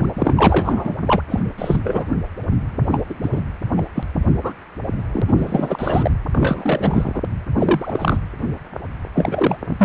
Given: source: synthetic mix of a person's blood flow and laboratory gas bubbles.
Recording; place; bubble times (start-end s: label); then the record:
Doppler ultrasound of blood flow; precordium
0.00-0.06 s: bubbles
0.16-0.93 s: bubbles
1.06-1.22 s: bubbles
1.30-1.40 s: bubbles
1.58-2.05 s: bubbles
2.91-3.00 s: bubbles
3.09-3.15 s: bubbles
3.22-3.40 s: bubbles
3.76-3.82 s: bubbles
3.94-4.04 s: bubbles
4.43-4.53 s: bubbles
5.12-5.22 s: bubbles
5.28-5.33 s: bubbles
5.38-6.11 s: bubbles
6.33-7.21 s: bubbles
7.58-8.18 s: bubbles
9.14-9.57 s: bubbles
9.66-9.85 s: bubbles
From the record:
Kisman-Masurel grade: 233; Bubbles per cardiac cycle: several, 3 to 8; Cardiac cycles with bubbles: 50 to 99%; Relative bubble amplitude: loud (0.450 to 0.775); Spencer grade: 3 (all of the cardiac periods contain showers or single bubble signals, but not dominating or overriding the cardiac motion signals); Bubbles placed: anywhere in the cardiac cycle